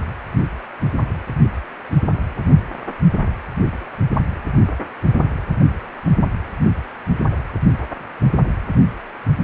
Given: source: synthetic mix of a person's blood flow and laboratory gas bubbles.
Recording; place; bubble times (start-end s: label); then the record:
Doppler ultrasound of blood flow; precordium
no bubbles
From the record:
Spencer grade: 0 (complete lack of bubble signals)